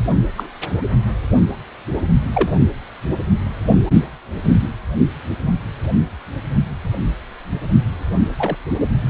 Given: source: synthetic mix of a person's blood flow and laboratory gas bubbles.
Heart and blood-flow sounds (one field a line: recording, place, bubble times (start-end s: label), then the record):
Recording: Doppler ultrasound of blood flow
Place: precordium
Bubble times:
0.37-0.47 s: bubbles
2.33-2.50 s: bubbles
8.38-8.55 s: bubbles
From the record:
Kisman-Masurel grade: 122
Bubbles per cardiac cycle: 1 to 2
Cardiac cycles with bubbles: 10 to 50%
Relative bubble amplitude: moderate (0.250 to 0.450)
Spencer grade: 2 (many but less than half of the cardiac periods contain bubble signals, singularly or in groups)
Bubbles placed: only in the low amplitude regions of the cardiac cycle